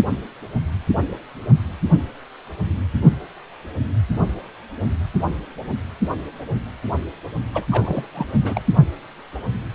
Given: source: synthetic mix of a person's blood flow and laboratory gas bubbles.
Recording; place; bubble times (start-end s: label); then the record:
Doppler ultrasound of blood flow; precordium
7.52-7.67 s: bubbles
7.69-8.08 s: bubbles
8.14-8.26 s: bubbles
8.44-8.62 s: bubbles
From the record:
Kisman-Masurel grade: 212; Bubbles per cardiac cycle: several, 3 to 8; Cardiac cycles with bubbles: 1 to 10%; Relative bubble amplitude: moderate (0.250 to 0.450); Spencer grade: 1 (occasional bubble signal discernible with the cardiac motion signal, with majority of cardiac periods free of bubbles); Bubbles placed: only in the low amplitude regions of the cardiac cycle